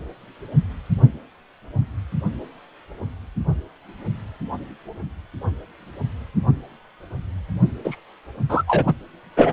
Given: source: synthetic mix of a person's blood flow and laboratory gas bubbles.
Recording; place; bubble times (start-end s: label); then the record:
Doppler ultrasound of blood flow; precordium
7.84-7.96 s: bubbles
8.49-8.63 s: bubbles
8.67-8.93 s: bubbles
9.36-9.52 s: bubbles
From the record:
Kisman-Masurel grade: 213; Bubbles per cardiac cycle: several, 3 to 8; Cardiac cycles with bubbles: 1 to 10%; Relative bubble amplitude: loud (0.450 to 0.775); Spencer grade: 1 (occasional bubble signal discernible with the cardiac motion signal, with majority of cardiac periods free of bubbles); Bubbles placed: only in the low amplitude regions of the cardiac cycle